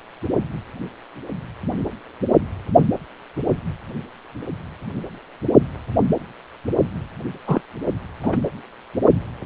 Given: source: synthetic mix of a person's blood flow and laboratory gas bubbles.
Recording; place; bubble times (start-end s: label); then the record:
Doppler ultrasound of blood flow; precordium
7.47-7.61 s: bubbles
8.22-8.38 s: bubbles
From the record:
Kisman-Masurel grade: 122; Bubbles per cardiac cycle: 1 to 2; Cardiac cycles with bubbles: 10 to 50%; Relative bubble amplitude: moderate (0.250 to 0.450); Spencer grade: 2 (many but less than half of the cardiac periods contain bubble signals, singularly or in groups); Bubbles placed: only in the low amplitude regions of the cardiac cycle